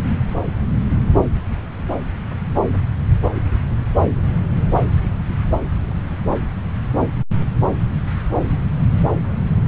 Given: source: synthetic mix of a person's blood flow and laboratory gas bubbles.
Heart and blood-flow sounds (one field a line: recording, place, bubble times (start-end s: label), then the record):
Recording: Doppler ultrasound of blood flow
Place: subclavian vein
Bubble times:
no bubbles
From the record:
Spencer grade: 0 (complete lack of bubble signals)